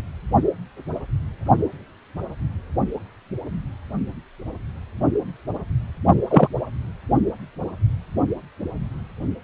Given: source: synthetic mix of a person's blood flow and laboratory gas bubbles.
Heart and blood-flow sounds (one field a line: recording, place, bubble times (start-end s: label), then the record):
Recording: Doppler ultrasound of blood flow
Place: precordium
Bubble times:
6.30-6.48 s: bubbles
From the record:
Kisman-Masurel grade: 113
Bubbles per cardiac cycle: 1 to 2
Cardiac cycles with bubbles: 1 to 10%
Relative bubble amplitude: loud (0.450 to 0.775)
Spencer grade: 1 (occasional bubble signal discernible with the cardiac motion signal, with majority of cardiac periods free of bubbles)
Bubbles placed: only in the low amplitude regions of the cardiac cycle